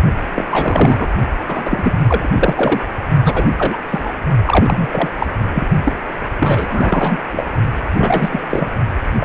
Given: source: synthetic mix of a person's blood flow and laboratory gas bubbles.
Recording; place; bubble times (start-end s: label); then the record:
Doppler ultrasound of blood flow; precordium
0.35-0.45 s: bubbles
0.51-1.07 s: bubbles
1.48-2.28 s: bubbles
2.32-2.86 s: bubbles
3.23-3.48 s: bubbles
3.57-3.77 s: bubbles
3.89-4.12 s: bubbles
4.45-4.88 s: bubbles
4.91-5.09 s: bubbles
5.19-5.27 s: bubbles
5.54-5.68 s: bubbles
5.85-5.93 s: bubbles
6.40-7.20 s: bubbles
7.32-7.45 s: bubbles
7.96-8.41 s: bubbles
8.50-8.69 s: bubbles
9.19-9.25 s: bubbles
From the record:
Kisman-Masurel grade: 343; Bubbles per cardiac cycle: rolling drumbeat, 9 or more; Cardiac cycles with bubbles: 100%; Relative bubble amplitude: loud (0.450 to 0.775); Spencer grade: 3 (all of the cardiac periods contain showers or single bubble signals, but not dominating or overriding the cardiac motion signals); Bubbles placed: only in the low amplitude regions of the cardiac cycle